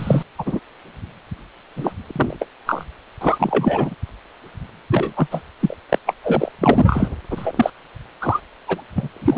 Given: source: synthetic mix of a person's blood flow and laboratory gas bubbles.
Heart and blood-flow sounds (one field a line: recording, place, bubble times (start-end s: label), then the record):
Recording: Doppler ultrasound of blood flow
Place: precordium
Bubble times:
0.00-0.22 s: bubbles
0.38-0.60 s: bubbles
1.76-1.92 s: bubbles
2.08-2.12 s: bubbles
2.16-2.37 s: bubbles
2.40-2.47 s: bubbles
2.66-2.84 s: bubbles
3.21-3.95 s: bubbles
4.92-5.13 s: bubbles
5.17-5.27 s: bubbles
5.31-5.42 s: bubbles
5.59-5.76 s: bubbles
5.89-5.99 s: bubbles
6.05-6.15 s: bubbles
6.24-6.51 s: bubbles
6.58-7.09 s: bubbles
7.30-7.53 s: bubbles
7.55-7.70 s: bubbles
8.21-8.40 s: bubbles
8.67-8.81 s: bubbles
8.95-9.08 s: bubbles
9.16-9.38 s: bubbles
From the record:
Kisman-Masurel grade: 243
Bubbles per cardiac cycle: several, 3 to 8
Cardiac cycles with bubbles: 100%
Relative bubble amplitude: loud (0.450 to 0.775)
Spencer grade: 3 (all of the cardiac periods contain showers or single bubble signals, but not dominating or overriding the cardiac motion signals)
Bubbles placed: anywhere in the cardiac cycle